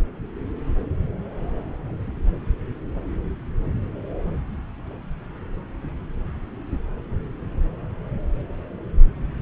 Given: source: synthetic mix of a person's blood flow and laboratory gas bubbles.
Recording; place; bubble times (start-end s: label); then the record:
Doppler ultrasound of blood flow; subclavian vein
no bubbles
From the record:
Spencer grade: 0 (complete lack of bubble signals)